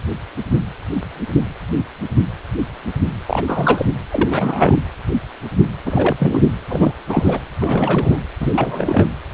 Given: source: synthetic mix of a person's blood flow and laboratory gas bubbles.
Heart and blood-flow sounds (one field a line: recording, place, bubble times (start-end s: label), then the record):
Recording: Doppler ultrasound of blood flow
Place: precordium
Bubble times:
3.26-3.44 s: bubbles
3.47-3.86 s: bubbles
4.08-4.80 s: bubbles
5.85-6.16 s: bubbles
6.20-6.47 s: bubbles
6.70-6.92 s: bubbles
7.08-7.40 s: bubbles
7.59-8.21 s: bubbles
8.40-9.10 s: bubbles
From the record:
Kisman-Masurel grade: 332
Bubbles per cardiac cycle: rolling drumbeat, 9 or more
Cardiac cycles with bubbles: 50 to 99%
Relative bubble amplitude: moderate (0.250 to 0.450)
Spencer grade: 3 (all of the cardiac periods contain showers or single bubble signals, but not dominating or overriding the cardiac motion signals)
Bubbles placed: anywhere in the cardiac cycle